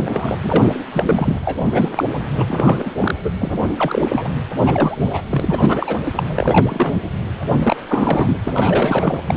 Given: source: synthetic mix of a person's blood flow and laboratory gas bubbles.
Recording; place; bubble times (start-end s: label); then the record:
Doppler ultrasound of blood flow; precordium
0.00-0.38 s: bubbles
0.43-0.73 s: bubbles
0.93-1.39 s: bubbles
1.41-1.90 s: bubbles
1.96-2.04 s: bubbles
2.38-2.44 s: bubbles
2.48-2.93 s: bubbles
2.98-3.15 s: bubbles
3.23-3.30 s: bubbles
3.40-3.72 s: bubbles
3.76-4.29 s: bubbles
4.62-5.21 s: bubbles
5.29-5.98 s: bubbles
6.16-6.23 s: bubbles
6.36-6.97 s: bubbles
7.62-7.76 s: bubbles
7.88-8.38 s: bubbles
8.43-9.19 s: bubbles
9.28-9.34 s: bubbles
From the record:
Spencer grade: 3 (all of the cardiac periods contain showers or single bubble signals, but not dominating or overriding the cardiac motion signals); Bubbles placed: anywhere in the cardiac cycle